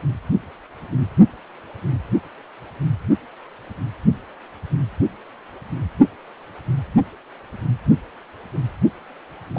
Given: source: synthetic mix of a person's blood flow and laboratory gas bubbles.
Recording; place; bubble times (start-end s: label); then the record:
Doppler ultrasound of blood flow; precordium
9.55-9.58 s: bubbles
From the record:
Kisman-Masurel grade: 113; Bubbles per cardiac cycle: 1 to 2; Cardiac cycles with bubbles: 1 to 10%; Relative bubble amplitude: loud (0.450 to 0.775); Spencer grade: 1 (occasional bubble signal discernible with the cardiac motion signal, with majority of cardiac periods free of bubbles); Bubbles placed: only in the low amplitude regions of the cardiac cycle